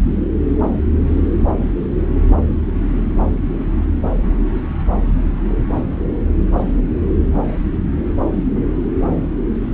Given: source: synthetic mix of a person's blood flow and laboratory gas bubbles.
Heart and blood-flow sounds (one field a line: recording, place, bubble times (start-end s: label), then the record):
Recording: Doppler ultrasound of blood flow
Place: subclavian vein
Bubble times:
no bubbles
From the record:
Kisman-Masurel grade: 000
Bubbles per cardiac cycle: 0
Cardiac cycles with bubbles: 0%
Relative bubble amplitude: no bubbles discernible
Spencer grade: 0 (complete lack of bubble signals)